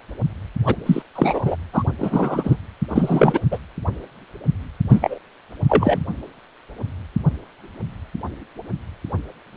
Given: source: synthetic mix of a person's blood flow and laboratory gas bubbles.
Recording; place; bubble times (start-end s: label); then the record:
Doppler ultrasound of blood flow; precordium
0.66-0.76 s: bubbles
0.86-1.02 s: bubbles
1.15-1.56 s: bubbles
1.72-1.83 s: bubbles
1.99-2.56 s: bubbles
2.88-3.40 s: bubbles
3.51-3.58 s: bubbles
4.88-5.18 s: bubbles
5.68-5.99 s: bubbles
From the record:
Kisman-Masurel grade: 233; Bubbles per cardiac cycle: several, 3 to 8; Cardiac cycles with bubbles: 50 to 99%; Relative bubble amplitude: loud (0.450 to 0.775); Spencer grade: 3 (all of the cardiac periods contain showers or single bubble signals, but not dominating or overriding the cardiac motion signals); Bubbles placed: anywhere in the cardiac cycle